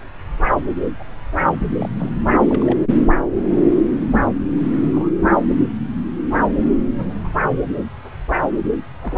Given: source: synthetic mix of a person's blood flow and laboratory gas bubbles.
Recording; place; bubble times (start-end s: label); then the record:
Doppler ultrasound of blood flow; subclavian vein
0.83-0.91 s: bubbles
0.99-1.04 s: bubbles
1.79-1.89 s: bubbles
1.96-2.10 s: bubbles
2.48-2.77 s: bubbles
2.91-3.12 s: bubbles
4.12-4.21 s: bubbles
4.81-5.11 s: bubbles
6.91-7.13 s: bubbles
7.24-7.27 s: bubbles
9.02-9.18 s: bubbles
From the record:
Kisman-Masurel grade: 121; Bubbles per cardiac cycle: 1 to 2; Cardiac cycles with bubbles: 10 to 50%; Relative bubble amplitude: barely perceptible (0.100 to 0.250); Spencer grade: 2 (many but less than half of the cardiac periods contain bubble signals, singularly or in groups); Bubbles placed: anywhere in the cardiac cycle